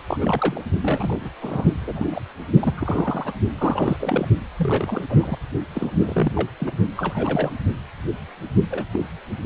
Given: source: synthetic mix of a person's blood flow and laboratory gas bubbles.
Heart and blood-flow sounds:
Doppler ultrasound of blood flow; precordium
0.07-0.61 s: bubbles
0.82-1.29 s: bubbles
1.41-1.65 s: bubbles
1.81-2.22 s: bubbles
2.60-3.32 s: bubbles
3.58-3.96 s: bubbles
4.00-4.28 s: bubbles
4.58-5.04 s: bubbles
5.09-5.38 s: bubbles
5.75-5.92 s: bubbles
6.00-6.48 s: bubbles
6.58-6.71 s: bubbles
6.96-7.53 s: bubbles
8.71-8.86 s: bubbles
8.92-9.06 s: bubbles
From the record:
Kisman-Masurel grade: 232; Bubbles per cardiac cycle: several, 3 to 8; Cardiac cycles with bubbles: 50 to 99%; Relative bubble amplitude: moderate (0.250 to 0.450); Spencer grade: 3 (all of the cardiac periods contain showers or single bubble signals, but not dominating or overriding the cardiac motion signals); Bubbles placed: only in the low amplitude regions of the cardiac cycle

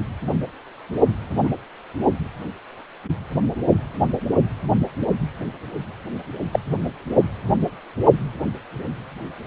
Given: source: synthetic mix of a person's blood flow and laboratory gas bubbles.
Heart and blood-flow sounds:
Doppler ultrasound of blood flow; precordium
1.42-1.50 s: bubbles
6.52-6.59 s: bubbles
From the record:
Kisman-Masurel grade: 123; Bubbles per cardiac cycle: 1 to 2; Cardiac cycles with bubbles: 10 to 50%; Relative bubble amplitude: loud (0.450 to 0.775); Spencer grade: 2 (many but less than half of the cardiac periods contain bubble signals, singularly or in groups); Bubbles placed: anywhere in the cardiac cycle

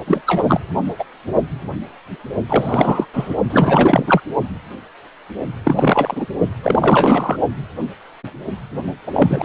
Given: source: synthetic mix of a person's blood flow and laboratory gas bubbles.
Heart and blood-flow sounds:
Doppler ultrasound of blood flow; precordium
0.07-0.22 s: bubbles
0.26-0.60 s: bubbles
0.98-1.04 s: bubbles
2.48-3.05 s: bubbles
3.13-3.34 s: bubbles
3.50-4.21 s: bubbles
5.64-6.26 s: bubbles
6.62-7.37 s: bubbles
9.07-9.44 s: bubbles
From the record:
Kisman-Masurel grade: 333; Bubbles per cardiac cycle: rolling drumbeat, 9 or more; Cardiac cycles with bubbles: 50 to 99%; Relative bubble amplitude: loud (0.450 to 0.775); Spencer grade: 3 (all of the cardiac periods contain showers or single bubble signals, but not dominating or overriding the cardiac motion signals); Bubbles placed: only in the low amplitude regions of the cardiac cycle

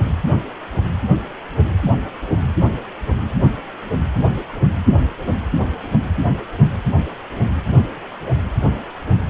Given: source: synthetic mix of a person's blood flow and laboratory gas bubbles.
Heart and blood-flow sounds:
Doppler ultrasound of blood flow; precordium
no bubbles
From the record:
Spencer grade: 0 (complete lack of bubble signals)

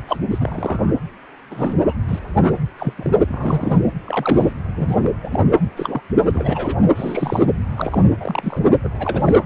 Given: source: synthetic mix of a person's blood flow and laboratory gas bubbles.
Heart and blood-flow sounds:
Doppler ultrasound of blood flow; precordium
0.07-0.17 s: bubbles
0.30-0.93 s: bubbles
1.50-1.75 s: bubbles
1.81-1.93 s: bubbles
2.08-2.19 s: bubbles
2.33-2.55 s: bubbles
2.77-2.94 s: bubbles
2.98-3.10 s: bubbles
3.31-3.80 s: bubbles
4.05-4.54 s: bubbles
4.75-4.96 s: bubbles
5.03-5.12 s: bubbles
5.23-5.28 s: bubbles
5.31-5.40 s: bubbles
5.77-6.01 s: bubbles
6.17-6.79 s: bubbles
6.96-7.45 s: bubbles
7.72-8.08 s: bubbles
8.20-8.60 s: bubbles
8.83-8.89 s: bubbles
8.94-9.41 s: bubbles
From the record:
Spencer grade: 3 (all of the cardiac periods contain showers or single bubble signals, but not dominating or overriding the cardiac motion signals); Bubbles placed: anywhere in the cardiac cycle

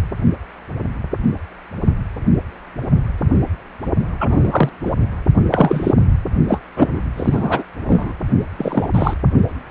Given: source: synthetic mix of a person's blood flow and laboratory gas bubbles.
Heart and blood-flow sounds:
Doppler ultrasound of blood flow; precordium
4.20-4.69 s: bubbles
4.84-4.92 s: bubbles
5.51-5.95 s: bubbles
6.48-6.61 s: bubbles
6.76-7.01 s: bubbles
7.17-7.64 s: bubbles
7.88-8.13 s: bubbles
8.57-8.87 s: bubbles
8.94-9.14 s: bubbles
From the record:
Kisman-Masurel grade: 223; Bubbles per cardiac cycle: several, 3 to 8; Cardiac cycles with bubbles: 10 to 50%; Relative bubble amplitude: loud (0.450 to 0.775); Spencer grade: 2 (many but less than half of the cardiac periods contain bubble signals, singularly or in groups); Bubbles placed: only in the low amplitude regions of the cardiac cycle

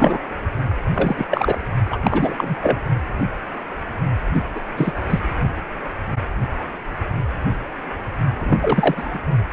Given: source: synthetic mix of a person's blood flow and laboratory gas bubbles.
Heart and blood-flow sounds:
Doppler ultrasound of blood flow; precordium
0.00-0.19 s: bubbles
0.95-1.25 s: bubbles
1.30-1.56 s: bubbles
1.90-1.99 s: bubbles
2.03-2.33 s: bubbles
2.38-2.56 s: bubbles
2.62-2.78 s: bubbles
4.33-4.43 s: bubbles
4.54-4.60 s: bubbles
4.76-4.92 s: bubbles
5.09-5.20 s: bubbles
8.38-9.19 s: bubbles
From the record:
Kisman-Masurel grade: 233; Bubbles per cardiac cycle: several, 3 to 8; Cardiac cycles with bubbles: 50 to 99%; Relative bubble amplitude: loud (0.450 to 0.775); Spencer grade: 3 (all of the cardiac periods contain showers or single bubble signals, but not dominating or overriding the cardiac motion signals); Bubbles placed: only in the low amplitude regions of the cardiac cycle

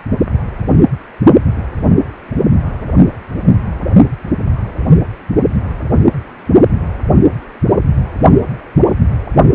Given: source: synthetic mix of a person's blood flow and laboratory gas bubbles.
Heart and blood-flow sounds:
Doppler ultrasound of blood flow; precordium
no bubbles
From the record:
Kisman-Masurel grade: 000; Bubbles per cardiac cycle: 0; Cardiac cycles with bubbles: 0%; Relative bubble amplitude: no bubbles discernible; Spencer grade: 0 (complete lack of bubble signals)

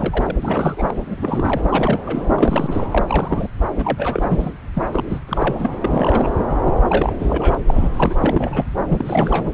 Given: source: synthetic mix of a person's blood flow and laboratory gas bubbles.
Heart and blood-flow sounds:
Doppler ultrasound of blood flow; subclavian vein
0.00-0.36 s: bubbles
0.42-0.94 s: bubbles
1.10-1.61 s: bubbles
1.68-2.27 s: bubbles
2.31-2.85 s: bubbles
2.91-3.04 s: bubbles
3.08-3.48 s: bubbles
3.78-4.51 s: bubbles
4.74-4.83 s: bubbles
4.91-5.04 s: bubbles
5.09-5.20 s: bubbles
5.27-5.67 s: bubbles
5.82-6.31 s: bubbles
6.67-6.71 s: bubbles
6.88-7.16 s: bubbles
7.19-7.55 s: bubbles
7.67-8.17 s: bubbles
8.21-8.64 s: bubbles
8.88-9.49 s: bubbles
From the record:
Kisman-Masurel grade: 332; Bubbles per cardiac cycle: rolling drumbeat, 9 or more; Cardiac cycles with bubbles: 50 to 99%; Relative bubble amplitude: moderate (0.250 to 0.450); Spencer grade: 3 (all of the cardiac periods contain showers or single bubble signals, but not dominating or overriding the cardiac motion signals); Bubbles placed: anywhere in the cardiac cycle

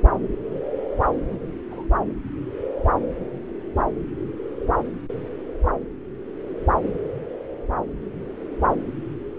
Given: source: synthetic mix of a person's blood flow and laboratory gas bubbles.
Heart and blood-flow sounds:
Doppler ultrasound of blood flow; subclavian vein
1.27-1.39 s: bubbles
1.71-1.87 s: bubbles
From the record:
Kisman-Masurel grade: 111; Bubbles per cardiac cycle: 1 to 2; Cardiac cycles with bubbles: 1 to 10%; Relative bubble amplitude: barely perceptible (0.100 to 0.250); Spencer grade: 1 (occasional bubble signal discernible with the cardiac motion signal, with majority of cardiac periods free of bubbles); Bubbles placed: anywhere in the cardiac cycle

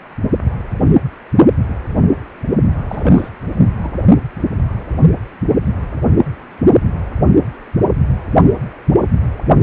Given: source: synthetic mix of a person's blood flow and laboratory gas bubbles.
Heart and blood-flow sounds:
Doppler ultrasound of blood flow; precordium
2.88-3.29 s: bubbles
3.81-3.91 s: bubbles
From the record:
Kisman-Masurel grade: 222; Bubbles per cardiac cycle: several, 3 to 8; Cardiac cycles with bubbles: 10 to 50%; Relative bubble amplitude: moderate (0.250 to 0.450); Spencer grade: 2 (many but less than half of the cardiac periods contain bubble signals, singularly or in groups); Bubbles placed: only in the low amplitude regions of the cardiac cycle

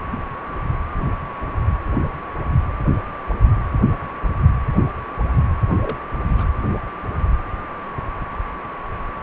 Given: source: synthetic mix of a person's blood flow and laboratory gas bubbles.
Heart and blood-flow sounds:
Doppler ultrasound of blood flow; precordium
5.82-5.96 s: bubbles
6.37-6.47 s: bubbles
From the record:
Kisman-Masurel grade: 121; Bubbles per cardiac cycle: 1 to 2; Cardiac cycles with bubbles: 10 to 50%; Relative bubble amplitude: barely perceptible (0.100 to 0.250); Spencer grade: 2 (many but less than half of the cardiac periods contain bubble signals, singularly or in groups); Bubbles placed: anywhere in the cardiac cycle

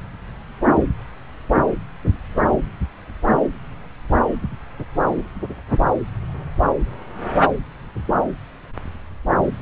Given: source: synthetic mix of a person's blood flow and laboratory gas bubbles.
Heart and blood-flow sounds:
Doppler ultrasound of blood flow; subclavian vein
no bubbles
From the record:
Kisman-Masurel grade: 000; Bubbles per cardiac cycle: 0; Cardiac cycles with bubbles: 0%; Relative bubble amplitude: no bubbles discernible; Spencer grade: 0 (complete lack of bubble signals)

